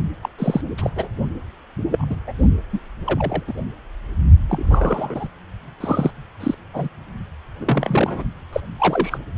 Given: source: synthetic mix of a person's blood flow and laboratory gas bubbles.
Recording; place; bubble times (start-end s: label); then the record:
Doppler ultrasound of blood flow; precordium
0.22-0.30 s: bubbles
0.39-0.61 s: bubbles
0.78-0.90 s: bubbles
0.96-1.08 s: bubbles
1.91-2.06 s: bubbles
2.10-2.16 s: bubbles
2.26-2.33 s: bubbles
2.72-2.79 s: bubbles
3.06-3.43 s: bubbles
3.47-3.54 s: bubbles
4.49-5.28 s: bubbles
5.80-6.11 s: bubbles
6.40-6.54 s: bubbles
6.74-6.89 s: bubbles
7.59-8.23 s: bubbles
8.52-8.60 s: bubbles
8.78-9.18 s: bubbles
From the record:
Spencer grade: 3 (all of the cardiac periods contain showers or single bubble signals, but not dominating or overriding the cardiac motion signals); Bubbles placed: only in the low amplitude regions of the cardiac cycle